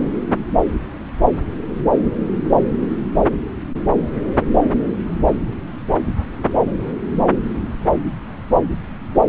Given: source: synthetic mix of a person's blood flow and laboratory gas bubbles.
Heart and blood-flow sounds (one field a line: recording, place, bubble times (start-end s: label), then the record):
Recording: Doppler ultrasound of blood flow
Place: subclavian vein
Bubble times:
no bubbles
From the record:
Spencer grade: 0 (complete lack of bubble signals)